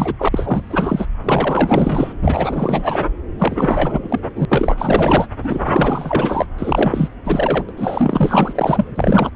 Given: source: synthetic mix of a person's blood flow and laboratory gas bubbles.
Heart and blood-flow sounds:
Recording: Doppler ultrasound of blood flow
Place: subclavian vein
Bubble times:
0.00-0.14 s: bubbles
0.19-0.28 s: bubbles
0.32-1.06 s: bubbles
1.24-2.13 s: bubbles
2.22-3.08 s: bubbles
3.38-4.21 s: bubbles
4.35-4.46 s: bubbles
4.48-5.26 s: bubbles
5.43-6.46 s: bubbles
6.57-7.08 s: bubbles
7.25-7.64 s: bubbles
7.69-7.74 s: bubbles
7.77-9.30 s: bubbles
From the record:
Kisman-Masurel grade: 444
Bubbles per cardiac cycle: continuous sound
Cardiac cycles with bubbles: 100%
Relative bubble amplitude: maximal (0.775 to 0.999)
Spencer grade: 4 (maximum detectable bubble signal sounding continuously throughout systole and diastole of every cardiac period, and overriding the amplitude of the normal cardiac signals)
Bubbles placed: anywhere in the cardiac cycle

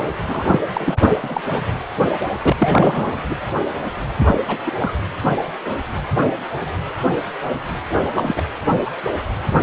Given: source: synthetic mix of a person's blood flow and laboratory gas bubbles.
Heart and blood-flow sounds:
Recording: Doppler ultrasound of blood flow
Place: precordium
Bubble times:
0.28-0.59 s: bubbles
0.73-0.97 s: bubbles
1.09-1.16 s: bubbles
1.22-1.41 s: bubbles
2.43-3.21 s: bubbles
3.29-3.35 s: bubbles
4.19-4.36 s: bubbles
4.47-4.57 s: bubbles
4.66-4.72 s: bubbles
4.78-4.93 s: bubbles
8.15-8.43 s: bubbles
8.85-8.90 s: bubbles
9.56-9.63 s: bubbles
From the record:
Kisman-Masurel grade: 232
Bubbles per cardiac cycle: several, 3 to 8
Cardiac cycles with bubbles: 50 to 99%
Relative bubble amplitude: moderate (0.250 to 0.450)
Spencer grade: 3 (all of the cardiac periods contain showers or single bubble signals, but not dominating or overriding the cardiac motion signals)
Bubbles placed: anywhere in the cardiac cycle

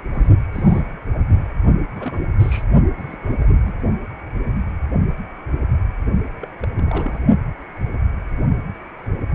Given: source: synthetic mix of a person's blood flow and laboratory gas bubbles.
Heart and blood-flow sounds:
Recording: Doppler ultrasound of blood flow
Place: precordium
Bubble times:
0.13-0.28 s: bubbles
0.53-0.82 s: bubbles
1.14-1.24 s: bubbles
1.95-2.22 s: bubbles
2.39-2.63 s: bubbles
2.97-3.04 s: bubbles
3.06-3.17 s: bubbles
3.22-3.32 s: bubbles
3.38-3.74 s: bubbles
6.41-6.47 s: bubbles
6.62-6.67 s: bubbles
6.75-7.21 s: bubbles
From the record:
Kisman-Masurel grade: 221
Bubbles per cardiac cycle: several, 3 to 8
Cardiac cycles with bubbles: 10 to 50%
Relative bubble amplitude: barely perceptible (0.100 to 0.250)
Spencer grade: 2 (many but less than half of the cardiac periods contain bubble signals, singularly or in groups)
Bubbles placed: only in the low amplitude regions of the cardiac cycle

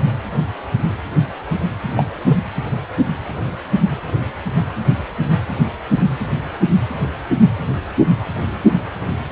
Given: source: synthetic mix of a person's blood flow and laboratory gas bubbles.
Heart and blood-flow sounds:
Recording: Doppler ultrasound of blood flow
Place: precordium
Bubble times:
1.96-2.06 s: bubbles
2.27-2.38 s: bubbles
From the record:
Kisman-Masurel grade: 113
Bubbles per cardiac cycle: 1 to 2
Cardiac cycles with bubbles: 1 to 10%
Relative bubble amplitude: loud (0.450 to 0.775)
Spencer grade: 1 (occasional bubble signal discernible with the cardiac motion signal, with majority of cardiac periods free of bubbles)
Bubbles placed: anywhere in the cardiac cycle

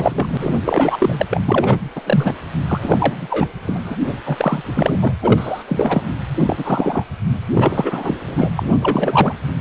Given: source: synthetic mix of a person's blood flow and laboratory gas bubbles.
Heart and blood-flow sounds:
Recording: Doppler ultrasound of blood flow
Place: precordium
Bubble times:
0.00-0.54 s: bubbles
0.65-1.26 s: bubbles
1.30-1.44 s: bubbles
1.47-1.78 s: bubbles
1.95-2.01 s: bubbles
2.05-2.33 s: bubbles
2.67-3.48 s: bubbles
3.62-3.96 s: bubbles
4.06-4.17 s: bubbles
4.25-4.63 s: bubbles
4.74-5.13 s: bubbles
5.22-5.63 s: bubbles
5.67-6.16 s: bubbles
6.40-7.04 s: bubbles
7.54-8.17 s: bubbles
8.25-8.49 s: bubbles
8.56-8.69 s: bubbles
8.80-9.34 s: bubbles
From the record:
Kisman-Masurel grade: 343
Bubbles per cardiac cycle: rolling drumbeat, 9 or more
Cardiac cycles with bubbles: 100%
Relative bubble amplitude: loud (0.450 to 0.775)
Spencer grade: 3 (all of the cardiac periods contain showers or single bubble signals, but not dominating or overriding the cardiac motion signals)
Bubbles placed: anywhere in the cardiac cycle

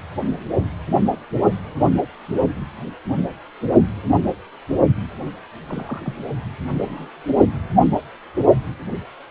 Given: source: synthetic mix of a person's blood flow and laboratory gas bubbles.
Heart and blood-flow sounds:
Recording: Doppler ultrasound of blood flow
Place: precordium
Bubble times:
5.68-6.14 s: bubbles
6.69-7.08 s: bubbles
From the record:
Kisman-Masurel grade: 121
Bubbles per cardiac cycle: 1 to 2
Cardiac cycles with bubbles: 10 to 50%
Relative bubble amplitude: barely perceptible (0.100 to 0.250)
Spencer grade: 2 (many but less than half of the cardiac periods contain bubble signals, singularly or in groups)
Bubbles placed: only in the low amplitude regions of the cardiac cycle

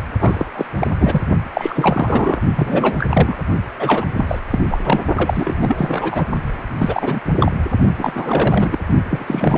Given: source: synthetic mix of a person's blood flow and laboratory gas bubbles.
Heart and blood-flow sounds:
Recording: Doppler ultrasound of blood flow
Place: precordium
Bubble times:
0.20-0.46 s: bubbles
0.56-0.65 s: bubbles
0.79-0.87 s: bubbles
0.97-1.24 s: bubbles
1.54-2.42 s: bubbles
2.55-3.06 s: bubbles
3.09-3.37 s: bubbles
3.79-4.06 s: bubbles
4.16-4.39 s: bubbles
4.50-4.60 s: bubbles
4.69-4.78 s: bubbles
4.83-5.00 s: bubbles
5.16-6.26 s: bubbles
6.79-7.21 s: bubbles
7.40-7.53 s: bubbles
7.98-8.78 s: bubbles
9.09-9.58 s: bubbles
From the record:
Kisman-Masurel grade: 343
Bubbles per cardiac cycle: rolling drumbeat, 9 or more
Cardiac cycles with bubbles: 100%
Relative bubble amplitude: loud (0.450 to 0.775)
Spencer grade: 3 (all of the cardiac periods contain showers or single bubble signals, but not dominating or overriding the cardiac motion signals)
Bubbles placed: only in the low amplitude regions of the cardiac cycle

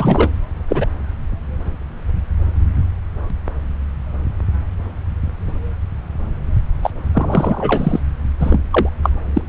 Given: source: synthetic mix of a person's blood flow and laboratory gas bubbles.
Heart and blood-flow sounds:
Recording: Doppler ultrasound of blood flow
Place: subclavian vein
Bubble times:
0.00-0.30 s: bubbles
0.68-0.86 s: bubbles
6.83-6.90 s: bubbles
7.14-8.00 s: bubbles
8.40-8.61 s: bubbles
8.71-8.89 s: bubbles
9.03-9.10 s: bubbles
9.34-9.42 s: bubbles
From the record:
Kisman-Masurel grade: 233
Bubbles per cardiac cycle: several, 3 to 8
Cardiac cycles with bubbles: 50 to 99%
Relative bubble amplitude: loud (0.450 to 0.775)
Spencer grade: 3 (all of the cardiac periods contain showers or single bubble signals, but not dominating or overriding the cardiac motion signals)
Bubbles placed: anywhere in the cardiac cycle

